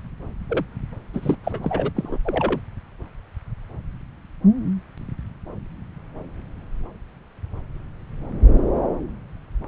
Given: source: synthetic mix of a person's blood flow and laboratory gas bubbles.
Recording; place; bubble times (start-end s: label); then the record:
Doppler ultrasound of blood flow; subclavian vein
0.49-0.65 s: bubbles
1.14-1.35 s: bubbles
1.44-1.91 s: bubbles
1.95-2.18 s: bubbles
2.24-2.60 s: bubbles
From the record:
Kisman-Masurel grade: 222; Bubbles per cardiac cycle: several, 3 to 8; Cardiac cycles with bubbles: 10 to 50%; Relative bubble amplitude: moderate (0.250 to 0.450); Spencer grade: 2 (many but less than half of the cardiac periods contain bubble signals, singularly or in groups); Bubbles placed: anywhere in the cardiac cycle